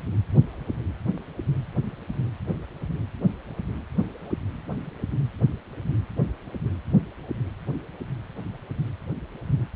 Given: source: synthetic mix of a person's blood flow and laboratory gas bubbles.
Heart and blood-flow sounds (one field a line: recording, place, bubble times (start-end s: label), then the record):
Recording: Doppler ultrasound of blood flow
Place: precordium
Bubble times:
no bubbles
From the record:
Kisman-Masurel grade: 000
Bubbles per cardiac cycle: 0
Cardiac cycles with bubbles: 0%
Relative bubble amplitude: no bubbles discernible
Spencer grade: 0 (complete lack of bubble signals)